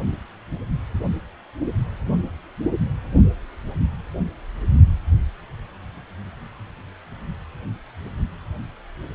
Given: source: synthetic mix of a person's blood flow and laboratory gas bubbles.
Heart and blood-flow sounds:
Doppler ultrasound of blood flow; precordium
no bubbles
From the record:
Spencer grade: 0 (complete lack of bubble signals)

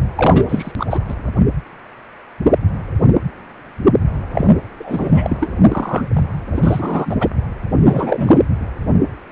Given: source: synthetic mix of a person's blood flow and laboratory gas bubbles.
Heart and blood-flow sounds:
Doppler ultrasound of blood flow; precordium
0.19-0.45 s: bubbles
0.49-0.72 s: bubbles
0.78-1.00 s: bubbles
1.08-1.15 s: bubbles
4.32-4.47 s: bubbles
4.79-5.37 s: bubbles
5.40-5.51 s: bubbles
5.68-6.08 s: bubbles
6.13-6.42 s: bubbles
6.53-7.28 s: bubbles
7.83-8.42 s: bubbles
From the record:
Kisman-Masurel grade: 233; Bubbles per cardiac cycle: several, 3 to 8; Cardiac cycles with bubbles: 50 to 99%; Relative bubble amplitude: loud (0.450 to 0.775); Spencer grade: 3 (all of the cardiac periods contain showers or single bubble signals, but not dominating or overriding the cardiac motion signals); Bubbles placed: anywhere in the cardiac cycle

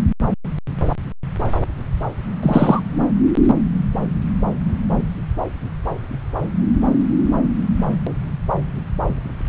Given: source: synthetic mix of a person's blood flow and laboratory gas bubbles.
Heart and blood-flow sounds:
Doppler ultrasound of blood flow; subclavian vein
2.42-2.82 s: bubbles
From the record:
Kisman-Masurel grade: 213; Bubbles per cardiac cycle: several, 3 to 8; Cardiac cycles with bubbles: 1 to 10%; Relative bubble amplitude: loud (0.450 to 0.775); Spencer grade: 1 (occasional bubble signal discernible with the cardiac motion signal, with majority of cardiac periods free of bubbles); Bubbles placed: anywhere in the cardiac cycle

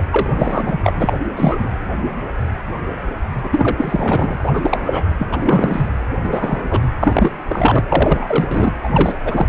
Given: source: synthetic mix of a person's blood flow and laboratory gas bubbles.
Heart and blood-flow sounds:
Doppler ultrasound of blood flow; precordium
0.00-0.04 s: bubbles
0.10-0.78 s: bubbles
0.83-0.92 s: bubbles
0.99-1.13 s: bubbles
1.35-1.69 s: bubbles
3.43-4.51 s: bubbles
4.54-5.08 s: bubbles
5.19-5.90 s: bubbles
6.24-6.81 s: bubbles
7.00-7.32 s: bubbles
7.48-7.85 s: bubbles
7.89-8.72 s: bubbles
8.82-8.89 s: bubbles
8.92-9.15 s: bubbles
9.25-9.47 s: bubbles
From the record:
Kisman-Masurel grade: 333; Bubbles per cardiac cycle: rolling drumbeat, 9 or more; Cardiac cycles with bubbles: 50 to 99%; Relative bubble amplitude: loud (0.450 to 0.775); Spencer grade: 3 (all of the cardiac periods contain showers or single bubble signals, but not dominating or overriding the cardiac motion signals); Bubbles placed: anywhere in the cardiac cycle

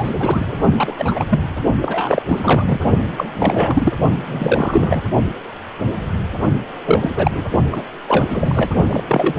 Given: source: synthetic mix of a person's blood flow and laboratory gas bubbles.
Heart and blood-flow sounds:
Doppler ultrasound of blood flow; precordium
0.00-0.71 s: bubbles
0.77-0.94 s: bubbles
0.98-1.39 s: bubbles
1.81-2.22 s: bubbles
2.27-2.80 s: bubbles
3.17-3.29 s: bubbles
3.34-3.92 s: bubbles
4.13-5.01 s: bubbles
6.85-7.45 s: bubbles
7.71-7.82 s: bubbles
8.06-8.72 s: bubbles
8.89-9.04 s: bubbles
9.08-9.35 s: bubbles
From the record:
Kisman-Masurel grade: 333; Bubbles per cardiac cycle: rolling drumbeat, 9 or more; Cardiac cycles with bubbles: 50 to 99%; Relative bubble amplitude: loud (0.450 to 0.775); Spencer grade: 3 (all of the cardiac periods contain showers or single bubble signals, but not dominating or overriding the cardiac motion signals); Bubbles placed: only in the low amplitude regions of the cardiac cycle

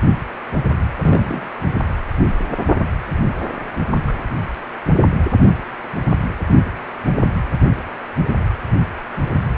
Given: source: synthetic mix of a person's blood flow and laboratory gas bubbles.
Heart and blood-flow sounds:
Doppler ultrasound of blood flow; precordium
1.00-1.48 s: bubbles
4.08-4.12 s: bubbles
From the record:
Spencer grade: 2 (many but less than half of the cardiac periods contain bubble signals, singularly or in groups); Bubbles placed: anywhere in the cardiac cycle

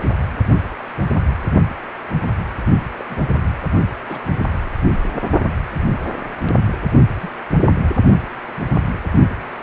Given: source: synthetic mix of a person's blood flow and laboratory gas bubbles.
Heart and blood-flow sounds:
Doppler ultrasound of blood flow; precordium
2.97-3.05 s: bubbles
3.09-3.15 s: bubbles
4.07-4.20 s: bubbles
4.53-4.71 s: bubbles
7.22-7.29 s: bubbles
From the record:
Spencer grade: 2 (many but less than half of the cardiac periods contain bubble signals, singularly or in groups); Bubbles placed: only in the low amplitude regions of the cardiac cycle

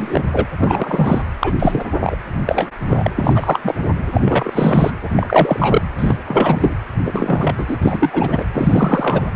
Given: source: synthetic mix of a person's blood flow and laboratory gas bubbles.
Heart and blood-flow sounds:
Doppler ultrasound of blood flow; precordium
0.00-0.25 s: bubbles
0.32-0.47 s: bubbles
0.57-1.23 s: bubbles
1.40-1.53 s: bubbles
1.58-1.83 s: bubbles
2.00-2.17 s: bubbles
2.46-2.67 s: bubbles
2.87-3.10 s: bubbles
3.16-3.75 s: bubbles
4.13-4.92 s: bubbles
5.03-5.11 s: bubbles
5.15-5.82 s: bubbles
5.99-6.17 s: bubbles
6.27-6.75 s: bubbles
7.05-7.78 s: bubbles
7.82-8.46 s: bubbles
8.53-9.30 s: bubbles
From the record:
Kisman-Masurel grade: 343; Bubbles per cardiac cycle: rolling drumbeat, 9 or more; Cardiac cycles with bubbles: 100%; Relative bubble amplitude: loud (0.450 to 0.775); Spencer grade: 3 (all of the cardiac periods contain showers or single bubble signals, but not dominating or overriding the cardiac motion signals); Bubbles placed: anywhere in the cardiac cycle

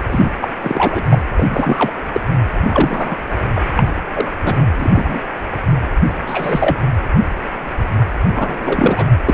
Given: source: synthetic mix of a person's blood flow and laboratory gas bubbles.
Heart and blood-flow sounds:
Doppler ultrasound of blood flow; precordium
0.11-0.31 s: bubbles
0.42-0.48 s: bubbles
0.61-1.03 s: bubbles
1.09-1.19 s: bubbles
1.37-1.92 s: bubbles
2.12-2.21 s: bubbles
2.58-3.16 s: bubbles
3.53-3.60 s: bubbles
3.76-3.83 s: bubbles
3.87-3.95 s: bubbles
4.13-4.25 s: bubbles
4.43-4.66 s: bubbles
4.78-5.21 s: bubbles
6.26-6.78 s: bubbles
8.28-9.06 s: bubbles
9.25-9.34 s: bubbles
From the record:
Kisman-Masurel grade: 233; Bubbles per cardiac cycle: several, 3 to 8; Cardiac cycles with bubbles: 50 to 99%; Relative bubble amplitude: loud (0.450 to 0.775); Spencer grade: 3 (all of the cardiac periods contain showers or single bubble signals, but not dominating or overriding the cardiac motion signals); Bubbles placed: anywhere in the cardiac cycle

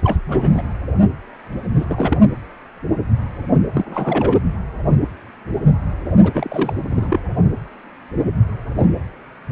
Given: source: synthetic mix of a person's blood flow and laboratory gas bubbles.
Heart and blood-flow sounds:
Doppler ultrasound of blood flow; precordium
0.03-0.18 s: bubbles
0.28-0.51 s: bubbles
0.54-0.62 s: bubbles
1.75-2.18 s: bubbles
3.73-4.39 s: bubbles
6.23-6.72 s: bubbles
6.90-7.19 s: bubbles
From the record:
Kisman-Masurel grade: 222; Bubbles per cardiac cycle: several, 3 to 8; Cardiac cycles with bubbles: 10 to 50%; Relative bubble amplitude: moderate (0.250 to 0.450); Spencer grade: 2 (many but less than half of the cardiac periods contain bubble signals, singularly or in groups); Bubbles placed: anywhere in the cardiac cycle

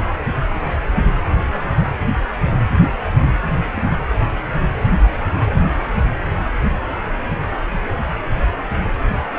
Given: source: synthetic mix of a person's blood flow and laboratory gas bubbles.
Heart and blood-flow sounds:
Doppler ultrasound of blood flow; precordium
1.79-1.85 s: bubbles
3.73-3.83 s: bubbles
From the record:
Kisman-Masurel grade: 121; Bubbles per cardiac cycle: 1 to 2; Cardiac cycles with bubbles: 10 to 50%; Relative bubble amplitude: barely perceptible (0.100 to 0.250); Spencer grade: 2 (many but less than half of the cardiac periods contain bubble signals, singularly or in groups); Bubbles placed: anywhere in the cardiac cycle

